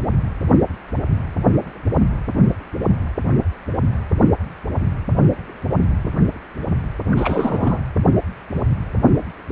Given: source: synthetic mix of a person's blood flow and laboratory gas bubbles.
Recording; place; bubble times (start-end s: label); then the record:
Doppler ultrasound of blood flow; precordium
7.06-7.79 s: bubbles
From the record:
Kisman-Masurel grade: 212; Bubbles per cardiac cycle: several, 3 to 8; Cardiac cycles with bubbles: 1 to 10%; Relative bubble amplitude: moderate (0.250 to 0.450); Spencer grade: 1 (occasional bubble signal discernible with the cardiac motion signal, with majority of cardiac periods free of bubbles); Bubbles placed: anywhere in the cardiac cycle